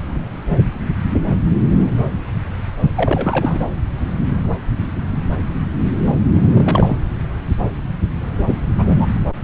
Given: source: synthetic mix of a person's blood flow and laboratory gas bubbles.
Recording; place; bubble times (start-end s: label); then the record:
Doppler ultrasound of blood flow; subclavian vein
2.96-3.67 s: bubbles
6.53-7.00 s: bubbles
8.38-8.44 s: bubbles
8.46-8.55 s: bubbles
8.77-9.06 s: bubbles
From the record:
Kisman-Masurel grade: 222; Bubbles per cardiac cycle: several, 3 to 8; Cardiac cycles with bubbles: 10 to 50%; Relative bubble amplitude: moderate (0.250 to 0.450); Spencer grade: 2 (many but less than half of the cardiac periods contain bubble signals, singularly or in groups); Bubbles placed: anywhere in the cardiac cycle